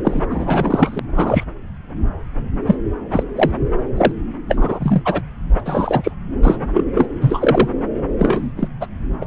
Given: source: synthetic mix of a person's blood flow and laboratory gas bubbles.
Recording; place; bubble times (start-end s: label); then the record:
Doppler ultrasound of blood flow; subclavian vein
0.04-0.22 s: bubbles
0.30-0.99 s: bubbles
1.16-1.44 s: bubbles
2.67-2.75 s: bubbles
3.11-3.23 s: bubbles
3.35-3.51 s: bubbles
3.97-4.12 s: bubbles
4.48-5.02 s: bubbles
5.04-5.22 s: bubbles
5.59-5.62 s: bubbles
5.65-6.12 s: bubbles
6.42-6.57 s: bubbles
6.73-6.84 s: bubbles
6.94-7.08 s: bubbles
7.21-7.68 s: bubbles
8.19-8.51 s: bubbles
8.56-8.68 s: bubbles
8.80-8.87 s: bubbles
9.21-9.25 s: bubbles
From the record:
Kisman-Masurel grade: 233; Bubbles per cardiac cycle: several, 3 to 8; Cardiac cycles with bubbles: 50 to 99%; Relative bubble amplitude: loud (0.450 to 0.775); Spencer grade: 3 (all of the cardiac periods contain showers or single bubble signals, but not dominating or overriding the cardiac motion signals); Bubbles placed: anywhere in the cardiac cycle